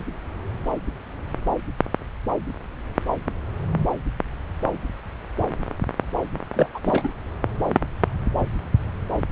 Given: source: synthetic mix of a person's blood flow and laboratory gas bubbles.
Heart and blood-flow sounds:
Doppler ultrasound of blood flow; subclavian vein
6.53-6.67 s: bubbles
6.74-6.79 s: bubbles
6.85-7.08 s: bubbles
From the record:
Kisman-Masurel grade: 212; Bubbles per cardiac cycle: several, 3 to 8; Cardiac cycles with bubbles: 1 to 10%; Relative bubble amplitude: moderate (0.250 to 0.450); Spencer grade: 1 (occasional bubble signal discernible with the cardiac motion signal, with majority of cardiac periods free of bubbles); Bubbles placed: anywhere in the cardiac cycle

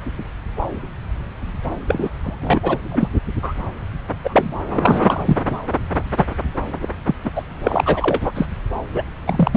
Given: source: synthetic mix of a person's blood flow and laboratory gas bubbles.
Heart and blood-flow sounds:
Doppler ultrasound of blood flow; subclavian vein
1.88-2.09 s: bubbles
2.23-2.78 s: bubbles
2.91-3.08 s: bubbles
3.42-3.54 s: bubbles
4.24-4.54 s: bubbles
4.76-5.37 s: bubbles
5.49-5.58 s: bubbles
6.17-6.26 s: bubbles
6.81-6.89 s: bubbles
7.06-7.15 s: bubbles
7.24-7.32 s: bubbles
7.35-7.43 s: bubbles
7.66-8.31 s: bubbles
8.34-8.47 s: bubbles
8.93-9.03 s: bubbles
9.26-9.57 s: bubbles
From the record:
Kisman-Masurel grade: 233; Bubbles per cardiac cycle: several, 3 to 8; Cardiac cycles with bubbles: 50 to 99%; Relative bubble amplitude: loud (0.450 to 0.775); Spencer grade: 3 (all of the cardiac periods contain showers or single bubble signals, but not dominating or overriding the cardiac motion signals); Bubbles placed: anywhere in the cardiac cycle

